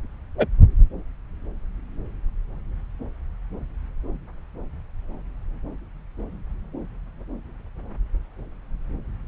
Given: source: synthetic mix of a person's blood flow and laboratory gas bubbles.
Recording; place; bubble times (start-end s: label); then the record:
Doppler ultrasound of blood flow; subclavian vein
0.37-0.47 s: bubbles
From the record:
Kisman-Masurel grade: 112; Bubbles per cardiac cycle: 1 to 2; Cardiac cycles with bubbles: 1 to 10%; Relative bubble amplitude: moderate (0.250 to 0.450); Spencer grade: 1 (occasional bubble signal discernible with the cardiac motion signal, with majority of cardiac periods free of bubbles); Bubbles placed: anywhere in the cardiac cycle